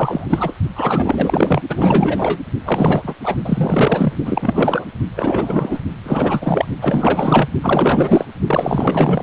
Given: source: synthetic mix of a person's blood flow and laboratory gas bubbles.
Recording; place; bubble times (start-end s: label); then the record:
Doppler ultrasound of blood flow; precordium
0.00-0.53 s: bubbles
0.75-1.61 s: bubbles
1.69-2.39 s: bubbles
2.64-3.15 s: bubbles
3.24-3.36 s: bubbles
3.45-4.13 s: bubbles
4.25-4.85 s: bubbles
5.16-5.79 s: bubbles
6.04-6.65 s: bubbles
6.81-7.48 s: bubbles
7.61-8.26 s: bubbles
8.46-9.23 s: bubbles
From the record:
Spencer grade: 4 (maximum detectable bubble signal sounding continuously throughout systole and diastole of every cardiac period, and overriding the amplitude of the normal cardiac signals); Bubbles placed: only in the low amplitude regions of the cardiac cycle